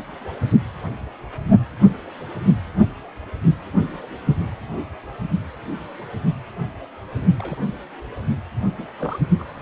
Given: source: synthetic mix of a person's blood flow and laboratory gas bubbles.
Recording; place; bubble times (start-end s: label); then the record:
Doppler ultrasound of blood flow; precordium
7.38-7.58 s: bubbles
7.67-7.75 s: bubbles
8.73-8.87 s: bubbles
8.97-9.20 s: bubbles
9.39-9.44 s: bubbles
9.55-9.62 s: bubbles
From the record:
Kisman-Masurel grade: 221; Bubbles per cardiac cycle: several, 3 to 8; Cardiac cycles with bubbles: 10 to 50%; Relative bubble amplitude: barely perceptible (0.100 to 0.250); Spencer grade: 2 (many but less than half of the cardiac periods contain bubble signals, singularly or in groups); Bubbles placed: only in the low amplitude regions of the cardiac cycle